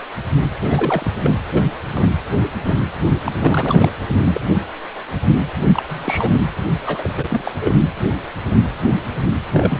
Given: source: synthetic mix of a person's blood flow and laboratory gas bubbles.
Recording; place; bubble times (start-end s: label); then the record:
Doppler ultrasound of blood flow; precordium
0.60-1.12 s: bubbles
1.23-1.34 s: bubbles
1.52-1.62 s: bubbles
1.97-2.10 s: bubbles
2.66-2.80 s: bubbles
3.26-3.32 s: bubbles
3.40-3.90 s: bubbles
4.25-4.40 s: bubbles
5.72-5.83 s: bubbles
5.88-6.42 s: bubbles
6.86-7.42 s: bubbles
7.45-7.52 s: bubbles
7.61-7.75 s: bubbles
9.53-9.79 s: bubbles
From the record:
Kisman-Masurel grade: 332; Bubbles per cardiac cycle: rolling drumbeat, 9 or more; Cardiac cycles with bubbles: 50 to 99%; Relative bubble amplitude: moderate (0.250 to 0.450); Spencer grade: 3 (all of the cardiac periods contain showers or single bubble signals, but not dominating or overriding the cardiac motion signals); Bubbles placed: anywhere in the cardiac cycle